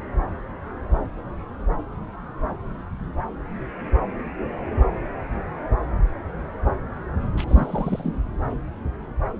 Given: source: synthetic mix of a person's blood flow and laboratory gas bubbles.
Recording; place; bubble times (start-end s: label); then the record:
Doppler ultrasound of blood flow; subclavian vein
7.37-7.45 s: bubbles
7.48-8.13 s: bubbles
From the record:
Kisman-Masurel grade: 211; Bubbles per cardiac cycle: several, 3 to 8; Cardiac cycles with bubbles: 1 to 10%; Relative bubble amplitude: barely perceptible (0.100 to 0.250); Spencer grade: 1 (occasional bubble signal discernible with the cardiac motion signal, with majority of cardiac periods free of bubbles); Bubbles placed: anywhere in the cardiac cycle